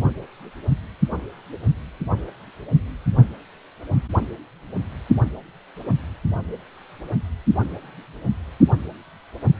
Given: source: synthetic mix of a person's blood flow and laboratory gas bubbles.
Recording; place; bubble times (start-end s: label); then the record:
Doppler ultrasound of blood flow; precordium
no bubbles
From the record:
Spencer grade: 0 (complete lack of bubble signals)